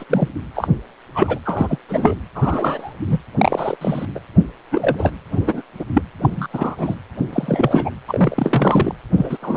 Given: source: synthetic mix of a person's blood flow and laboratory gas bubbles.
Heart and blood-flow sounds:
Doppler ultrasound of blood flow; precordium
0.00-0.04 s: bubbles
0.09-0.28 s: bubbles
0.55-0.68 s: bubbles
1.15-1.39 s: bubbles
1.45-1.79 s: bubbles
1.88-2.15 s: bubbles
2.35-2.94 s: bubbles
3.07-3.18 s: bubbles
3.37-3.76 s: bubbles
3.81-4.05 s: bubbles
4.14-4.19 s: bubbles
4.71-5.11 s: bubbles
5.30-5.62 s: bubbles
5.79-5.85 s: bubbles
5.93-6.01 s: bubbles
6.21-6.47 s: bubbles
6.53-6.75 s: bubbles
6.78-6.95 s: bubbles
7.33-7.90 s: bubbles
8.07-8.95 s: bubbles
9.12-9.38 s: bubbles
9.42-9.57 s: bubbles
From the record:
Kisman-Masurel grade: 243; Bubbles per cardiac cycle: several, 3 to 8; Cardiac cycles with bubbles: 100%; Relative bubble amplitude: loud (0.450 to 0.775); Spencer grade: 3 (all of the cardiac periods contain showers or single bubble signals, but not dominating or overriding the cardiac motion signals); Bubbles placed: anywhere in the cardiac cycle

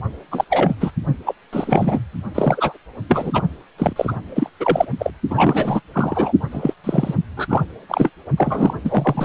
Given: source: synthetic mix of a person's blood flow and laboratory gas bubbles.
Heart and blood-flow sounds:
Doppler ultrasound of blood flow; precordium
0.32-0.45 s: bubbles
0.49-0.75 s: bubbles
0.80-0.92 s: bubbles
1.25-1.34 s: bubbles
1.51-2.00 s: bubbles
2.34-2.77 s: bubbles
3.08-3.42 s: bubbles
3.78-3.93 s: bubbles
3.96-4.13 s: bubbles
4.35-4.50 s: bubbles
4.60-4.85 s: bubbles
4.99-5.10 s: bubbles
5.30-5.80 s: bubbles
5.93-6.33 s: bubbles
6.51-6.74 s: bubbles
6.84-7.15 s: bubbles
7.37-7.64 s: bubbles
7.89-8.10 s: bubbles
8.37-8.74 s: bubbles
8.84-9.25 s: bubbles
From the record:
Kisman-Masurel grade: 343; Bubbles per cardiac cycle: rolling drumbeat, 9 or more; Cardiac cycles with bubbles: 100%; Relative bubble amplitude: loud (0.450 to 0.775); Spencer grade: 3 (all of the cardiac periods contain showers or single bubble signals, but not dominating or overriding the cardiac motion signals); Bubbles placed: only in the low amplitude regions of the cardiac cycle

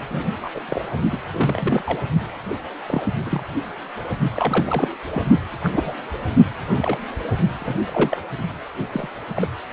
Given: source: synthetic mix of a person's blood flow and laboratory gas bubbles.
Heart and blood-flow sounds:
Doppler ultrasound of blood flow; precordium
0.10-0.30 s: bubbles
0.42-0.50 s: bubbles
0.54-0.60 s: bubbles
0.69-0.81 s: bubbles
1.12-1.18 s: bubbles
1.31-1.99 s: bubbles
2.88-3.07 s: bubbles
3.25-3.43 s: bubbles
4.33-4.88 s: bubbles
5.13-5.27 s: bubbles
5.63-5.94 s: bubbles
6.69-6.98 s: bubbles
7.60-7.75 s: bubbles
7.88-8.22 s: bubbles
8.79-8.88 s: bubbles
8.91-9.08 s: bubbles
9.35-9.47 s: bubbles
9.71-9.73 s: bubbles
From the record:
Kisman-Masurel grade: 242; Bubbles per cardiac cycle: several, 3 to 8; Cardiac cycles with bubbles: 100%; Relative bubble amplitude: moderate (0.250 to 0.450); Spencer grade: 3 (all of the cardiac periods contain showers or single bubble signals, but not dominating or overriding the cardiac motion signals); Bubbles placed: only in the low amplitude regions of the cardiac cycle

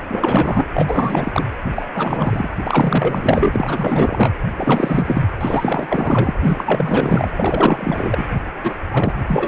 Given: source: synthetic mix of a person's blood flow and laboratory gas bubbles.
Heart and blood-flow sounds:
Doppler ultrasound of blood flow; precordium
0.08-0.66 s: bubbles
0.76-1.45 s: bubbles
1.74-1.86 s: bubbles
1.94-2.50 s: bubbles
2.63-4.33 s: bubbles
4.57-5.28 s: bubbles
5.39-6.34 s: bubbles
6.42-7.31 s: bubbles
7.36-8.25 s: bubbles
8.63-8.75 s: bubbles
8.90-9.13 s: bubbles
9.28-9.48 s: bubbles
From the record:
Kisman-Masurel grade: 444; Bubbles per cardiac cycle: continuous sound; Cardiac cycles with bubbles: 100%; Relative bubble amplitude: maximal (0.775 to 0.999); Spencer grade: 4 (maximum detectable bubble signal sounding continuously throughout systole and diastole of every cardiac period, and overriding the amplitude of the normal cardiac signals); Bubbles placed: anywhere in the cardiac cycle

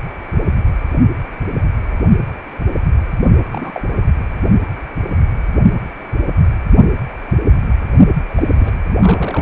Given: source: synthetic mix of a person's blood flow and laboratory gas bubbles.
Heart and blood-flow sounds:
Doppler ultrasound of blood flow; precordium
3.47-3.81 s: bubbles
8.28-8.72 s: bubbles
9.02-9.42 s: bubbles
From the record:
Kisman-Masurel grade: 221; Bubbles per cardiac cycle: several, 3 to 8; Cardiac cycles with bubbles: 10 to 50%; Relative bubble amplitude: barely perceptible (0.100 to 0.250); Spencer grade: 2 (many but less than half of the cardiac periods contain bubble signals, singularly or in groups); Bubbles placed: only in the low amplitude regions of the cardiac cycle

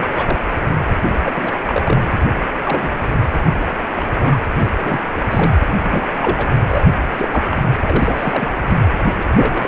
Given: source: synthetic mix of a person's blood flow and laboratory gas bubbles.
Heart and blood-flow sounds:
Doppler ultrasound of blood flow; precordium
0.00-0.05 s: bubbles
0.16-0.39 s: bubbles
1.23-1.52 s: bubbles
1.66-2.08 s: bubbles
2.63-2.88 s: bubbles
3.59-3.64 s: bubbles
3.96-4.14 s: bubbles
4.21-4.39 s: bubbles
4.62-4.68 s: bubbles
4.76-5.00 s: bubbles
5.17-5.23 s: bubbles
5.30-5.54 s: bubbles
5.90-6.04 s: bubbles
6.22-6.52 s: bubbles
6.69-6.83 s: bubbles
7.17-7.44 s: bubbles
7.50-7.58 s: bubbles
7.87-8.49 s: bubbles
8.70-8.78 s: bubbles
9.35-9.68 s: bubbles
From the record:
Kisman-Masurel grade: 242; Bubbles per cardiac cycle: several, 3 to 8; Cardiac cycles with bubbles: 100%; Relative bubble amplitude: moderate (0.250 to 0.450); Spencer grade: 3 (all of the cardiac periods contain showers or single bubble signals, but not dominating or overriding the cardiac motion signals); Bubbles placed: anywhere in the cardiac cycle

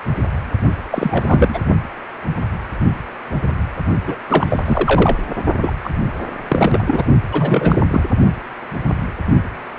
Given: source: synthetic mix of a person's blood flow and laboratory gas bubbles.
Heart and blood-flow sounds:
Doppler ultrasound of blood flow; precordium
0.91-1.60 s: bubbles
4.07-4.17 s: bubbles
4.29-5.17 s: bubbles
5.62-5.74 s: bubbles
5.83-5.90 s: bubbles
6.48-7.04 s: bubbles
7.31-7.80 s: bubbles
7.91-8.01 s: bubbles
From the record:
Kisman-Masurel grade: 333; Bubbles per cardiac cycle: rolling drumbeat, 9 or more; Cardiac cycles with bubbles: 50 to 99%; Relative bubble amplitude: loud (0.450 to 0.775); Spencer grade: 3 (all of the cardiac periods contain showers or single bubble signals, but not dominating or overriding the cardiac motion signals); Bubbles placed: only in the low amplitude regions of the cardiac cycle

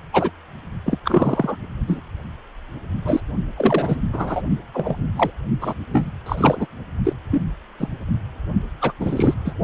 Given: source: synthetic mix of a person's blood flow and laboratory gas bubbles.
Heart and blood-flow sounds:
Doppler ultrasound of blood flow; precordium
0.12-0.31 s: bubbles
0.85-0.98 s: bubbles
1.05-1.56 s: bubbles
1.88-2.00 s: bubbles
3.04-3.20 s: bubbles
3.56-3.95 s: bubbles
4.12-4.42 s: bubbles
4.74-4.97 s: bubbles
5.16-5.31 s: bubbles
5.61-5.74 s: bubbles
5.92-6.12 s: bubbles
6.26-6.67 s: bubbles
7.04-7.13 s: bubbles
7.31-7.42 s: bubbles
7.79-7.89 s: bubbles
8.81-8.92 s: bubbles
9.00-9.34 s: bubbles
9.45-9.53 s: bubbles
From the record:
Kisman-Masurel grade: 242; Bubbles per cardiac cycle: several, 3 to 8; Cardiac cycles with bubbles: 100%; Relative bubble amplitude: moderate (0.250 to 0.450); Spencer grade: 3 (all of the cardiac periods contain showers or single bubble signals, but not dominating or overriding the cardiac motion signals); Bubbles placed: only in the low amplitude regions of the cardiac cycle

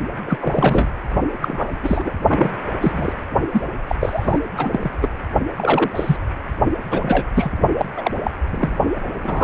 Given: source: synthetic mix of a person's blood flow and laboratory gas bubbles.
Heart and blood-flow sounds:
Doppler ultrasound of blood flow; precordium
0.27-0.89 s: bubbles
1.42-1.73 s: bubbles
1.83-2.14 s: bubbles
2.28-2.52 s: bubbles
2.81-3.12 s: bubbles
3.52-3.62 s: bubbles
3.88-3.96 s: bubbles
4.00-4.39 s: bubbles
4.57-4.89 s: bubbles
5.01-5.08 s: bubbles
5.56-6.17 s: bubbles
6.90-7.25 s: bubbles
7.35-7.50 s: bubbles
7.79-7.90 s: bubbles
7.96-8.12 s: bubbles
8.24-8.30 s: bubbles
8.50-8.77 s: bubbles
9.13-9.43 s: bubbles
From the record:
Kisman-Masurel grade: 243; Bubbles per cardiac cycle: several, 3 to 8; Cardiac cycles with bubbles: 100%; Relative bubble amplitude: loud (0.450 to 0.775); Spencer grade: 3 (all of the cardiac periods contain showers or single bubble signals, but not dominating or overriding the cardiac motion signals); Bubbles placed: only in the low amplitude regions of the cardiac cycle

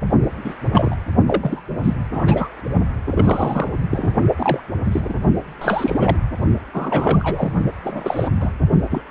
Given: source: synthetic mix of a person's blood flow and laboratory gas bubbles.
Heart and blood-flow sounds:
Doppler ultrasound of blood flow; precordium
0.44-0.54 s: bubbles
0.71-0.97 s: bubbles
1.27-1.61 s: bubbles
1.83-1.94 s: bubbles
2.14-2.48 s: bubbles
3.07-3.70 s: bubbles
3.90-4.12 s: bubbles
4.36-4.60 s: bubbles
4.85-5.14 s: bubbles
5.61-6.17 s: bubbles
6.72-7.51 s: bubbles
7.83-8.28 s: bubbles
8.40-8.54 s: bubbles
8.90-9.02 s: bubbles
From the record:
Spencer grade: 3 (all of the cardiac periods contain showers or single bubble signals, but not dominating or overriding the cardiac motion signals); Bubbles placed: only in the low amplitude regions of the cardiac cycle

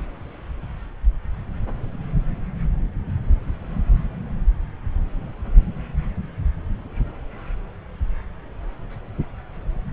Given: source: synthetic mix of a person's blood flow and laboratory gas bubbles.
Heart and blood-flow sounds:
Doppler ultrasound of blood flow; subclavian vein
no bubbles
From the record:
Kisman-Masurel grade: 000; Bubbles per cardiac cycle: 0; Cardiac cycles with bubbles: 0%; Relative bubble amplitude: no bubbles discernible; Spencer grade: 0 (complete lack of bubble signals)

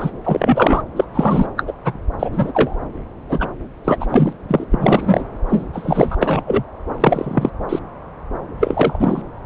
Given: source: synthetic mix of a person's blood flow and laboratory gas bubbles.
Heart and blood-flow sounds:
Doppler ultrasound of blood flow; subclavian vein
0.00-0.11 s: bubbles
0.25-0.82 s: bubbles
0.96-1.04 s: bubbles
1.14-1.47 s: bubbles
1.56-1.63 s: bubbles
1.67-1.73 s: bubbles
1.84-1.93 s: bubbles
2.19-2.76 s: bubbles
3.29-3.47 s: bubbles
3.84-3.97 s: bubbles
4.00-4.06 s: bubbles
4.09-4.33 s: bubbles
4.48-4.65 s: bubbles
4.71-5.25 s: bubbles
5.49-5.64 s: bubbles
5.72-6.17 s: bubbles
6.21-6.42 s: bubbles
6.46-6.63 s: bubbles
7.00-7.50 s: bubbles
7.68-7.79 s: bubbles
8.60-9.21 s: bubbles
From the record:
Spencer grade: 3 (all of the cardiac periods contain showers or single bubble signals, but not dominating or overriding the cardiac motion signals); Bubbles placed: anywhere in the cardiac cycle

